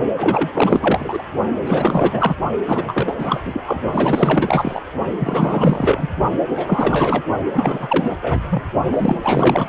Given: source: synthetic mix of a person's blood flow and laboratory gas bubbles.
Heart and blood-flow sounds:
Doppler ultrasound of blood flow; precordium
0.17-0.49 s: bubbles
0.54-1.23 s: bubbles
1.66-2.35 s: bubbles
2.66-3.41 s: bubbles
3.45-3.61 s: bubbles
3.66-3.82 s: bubbles
3.92-4.82 s: bubbles
5.19-6.08 s: bubbles
6.54-7.22 s: bubbles
7.53-8.15 s: bubbles
8.22-8.40 s: bubbles
8.49-8.63 s: bubbles
8.91-9.69 s: bubbles
From the record:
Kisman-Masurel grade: 444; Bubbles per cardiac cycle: continuous sound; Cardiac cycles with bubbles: 100%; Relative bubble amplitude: maximal (0.775 to 0.999); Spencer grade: 4 (maximum detectable bubble signal sounding continuously throughout systole and diastole of every cardiac period, and overriding the amplitude of the normal cardiac signals); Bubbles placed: only in the low amplitude regions of the cardiac cycle

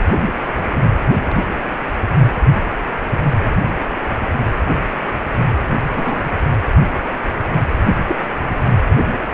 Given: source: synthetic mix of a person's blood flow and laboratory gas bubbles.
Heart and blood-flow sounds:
Doppler ultrasound of blood flow; precordium
5.94-6.22 s: bubbles
8.08-8.16 s: bubbles
From the record:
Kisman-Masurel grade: 122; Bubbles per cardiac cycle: 1 to 2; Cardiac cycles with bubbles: 10 to 50%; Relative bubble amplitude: moderate (0.250 to 0.450); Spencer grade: 2 (many but less than half of the cardiac periods contain bubble signals, singularly or in groups); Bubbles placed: anywhere in the cardiac cycle

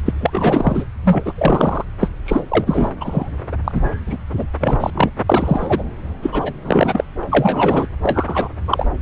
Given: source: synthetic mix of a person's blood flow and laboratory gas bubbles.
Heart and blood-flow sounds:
Doppler ultrasound of blood flow; subclavian vein
0.05-0.11 s: bubbles
0.20-0.84 s: bubbles
1.04-1.32 s: bubbles
1.38-1.84 s: bubbles
2.00-2.10 s: bubbles
2.25-2.41 s: bubbles
2.50-2.91 s: bubbles
3.00-3.30 s: bubbles
3.52-3.56 s: bubbles
3.64-3.88 s: bubbles
4.06-4.17 s: bubbles
4.37-4.45 s: bubbles
4.60-4.90 s: bubbles
4.95-5.11 s: bubbles
5.29-5.83 s: bubbles
6.22-6.52 s: bubbles
6.64-7.04 s: bubbles
7.23-7.26 s: bubbles
7.29-7.87 s: bubbles
8.02-8.48 s: bubbles
8.67-8.87 s: bubbles
From the record:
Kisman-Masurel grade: 243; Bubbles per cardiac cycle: several, 3 to 8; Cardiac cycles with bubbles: 100%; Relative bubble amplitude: loud (0.450 to 0.775); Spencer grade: 3 (all of the cardiac periods contain showers or single bubble signals, but not dominating or overriding the cardiac motion signals); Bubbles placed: anywhere in the cardiac cycle

